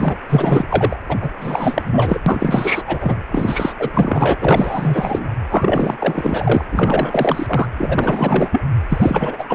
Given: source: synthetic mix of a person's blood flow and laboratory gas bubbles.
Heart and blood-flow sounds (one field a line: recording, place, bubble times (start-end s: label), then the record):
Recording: Doppler ultrasound of blood flow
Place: precordium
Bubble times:
0.00-0.16 s: bubbles
0.28-0.65 s: bubbles
0.68-0.97 s: bubbles
1.08-1.17 s: bubbles
1.21-1.30 s: bubbles
1.41-2.21 s: bubbles
2.26-2.83 s: bubbles
2.85-3.21 s: bubbles
3.32-3.73 s: bubbles
3.79-3.90 s: bubbles
3.93-4.38 s: bubbles
4.41-5.35 s: bubbles
5.50-6.65 s: bubbles
6.72-7.67 s: bubbles
7.76-8.62 s: bubbles
8.89-9.45 s: bubbles
9.49-9.55 s: bubbles
From the record:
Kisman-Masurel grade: 444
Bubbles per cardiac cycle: continuous sound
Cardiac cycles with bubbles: 100%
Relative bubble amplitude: maximal (0.775 to 0.999)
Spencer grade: 4 (maximum detectable bubble signal sounding continuously throughout systole and diastole of every cardiac period, and overriding the amplitude of the normal cardiac signals)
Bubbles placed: anywhere in the cardiac cycle